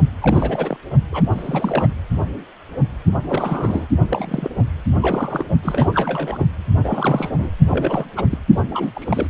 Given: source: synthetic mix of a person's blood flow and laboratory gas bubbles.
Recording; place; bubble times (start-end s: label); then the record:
Doppler ultrasound of blood flow; precordium
0.20-0.77 s: bubbles
1.11-1.22 s: bubbles
1.31-1.87 s: bubbles
3.25-3.86 s: bubbles
4.08-4.50 s: bubbles
5.01-5.46 s: bubbles
5.62-6.46 s: bubbles
6.83-7.50 s: bubbles
7.71-8.04 s: bubbles
8.16-8.25 s: bubbles
8.29-8.38 s: bubbles
8.70-9.27 s: bubbles
From the record:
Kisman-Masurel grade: 332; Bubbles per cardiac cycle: rolling drumbeat, 9 or more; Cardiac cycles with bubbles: 50 to 99%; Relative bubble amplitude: moderate (0.250 to 0.450); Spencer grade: 3 (all of the cardiac periods contain showers or single bubble signals, but not dominating or overriding the cardiac motion signals); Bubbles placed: only in the low amplitude regions of the cardiac cycle